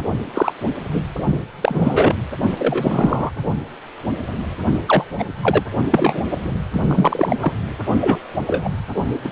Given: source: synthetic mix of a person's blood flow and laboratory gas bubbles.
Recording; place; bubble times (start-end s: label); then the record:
Doppler ultrasound of blood flow; precordium
0.33-0.54 s: bubbles
0.93-1.01 s: bubbles
1.62-2.15 s: bubbles
2.58-3.31 s: bubbles
4.87-5.04 s: bubbles
5.18-5.25 s: bubbles
5.42-5.63 s: bubbles
5.91-6.22 s: bubbles
6.30-6.52 s: bubbles
6.72-7.36 s: bubbles
7.41-7.54 s: bubbles
8.00-8.18 s: bubbles
8.46-8.69 s: bubbles
9.24-9.32 s: bubbles
From the record:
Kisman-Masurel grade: 233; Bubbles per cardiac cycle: several, 3 to 8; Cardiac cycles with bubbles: 50 to 99%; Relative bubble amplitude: loud (0.450 to 0.775); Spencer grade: 3 (all of the cardiac periods contain showers or single bubble signals, but not dominating or overriding the cardiac motion signals); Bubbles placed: only in the low amplitude regions of the cardiac cycle